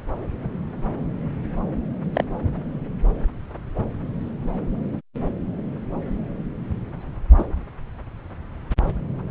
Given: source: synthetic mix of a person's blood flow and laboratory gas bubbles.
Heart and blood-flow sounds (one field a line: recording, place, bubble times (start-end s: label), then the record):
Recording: Doppler ultrasound of blood flow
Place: subclavian vein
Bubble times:
2.13-2.24 s: bubbles
7.38-7.45 s: bubbles
From the record:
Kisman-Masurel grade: 122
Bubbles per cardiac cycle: 1 to 2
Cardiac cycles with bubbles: 10 to 50%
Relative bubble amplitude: moderate (0.250 to 0.450)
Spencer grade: 2 (many but less than half of the cardiac periods contain bubble signals, singularly or in groups)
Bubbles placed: anywhere in the cardiac cycle